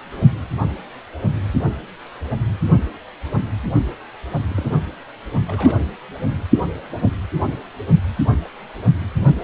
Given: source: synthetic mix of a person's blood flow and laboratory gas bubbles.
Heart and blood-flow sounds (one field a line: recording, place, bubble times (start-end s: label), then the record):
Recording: Doppler ultrasound of blood flow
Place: precordium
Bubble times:
4.49-4.78 s: bubbles
5.46-5.78 s: bubbles
From the record:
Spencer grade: 2 (many but less than half of the cardiac periods contain bubble signals, singularly or in groups)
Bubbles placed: only in the low amplitude regions of the cardiac cycle